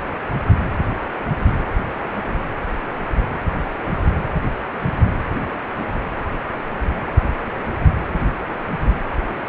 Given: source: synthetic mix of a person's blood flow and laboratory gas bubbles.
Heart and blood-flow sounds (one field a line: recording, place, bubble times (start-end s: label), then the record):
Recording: Doppler ultrasound of blood flow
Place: precordium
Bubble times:
no bubbles
From the record:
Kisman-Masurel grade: 000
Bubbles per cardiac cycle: 0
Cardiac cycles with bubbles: 0%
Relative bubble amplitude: no bubbles discernible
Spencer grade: 0 (complete lack of bubble signals)